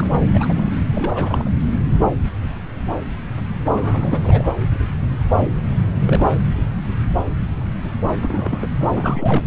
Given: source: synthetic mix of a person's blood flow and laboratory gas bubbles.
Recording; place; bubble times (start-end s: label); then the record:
Doppler ultrasound of blood flow; subclavian vein
0.00-0.08 s: bubbles
0.20-0.24 s: bubbles
0.34-0.71 s: bubbles
0.92-1.51 s: bubbles
3.69-4.48 s: bubbles
6.06-6.50 s: bubbles
8.23-8.68 s: bubbles
8.81-8.88 s: bubbles
8.94-9.46 s: bubbles
From the record:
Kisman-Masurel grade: 232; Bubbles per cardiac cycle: several, 3 to 8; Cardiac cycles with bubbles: 50 to 99%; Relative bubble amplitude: moderate (0.250 to 0.450); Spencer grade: 3 (all of the cardiac periods contain showers or single bubble signals, but not dominating or overriding the cardiac motion signals); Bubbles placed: anywhere in the cardiac cycle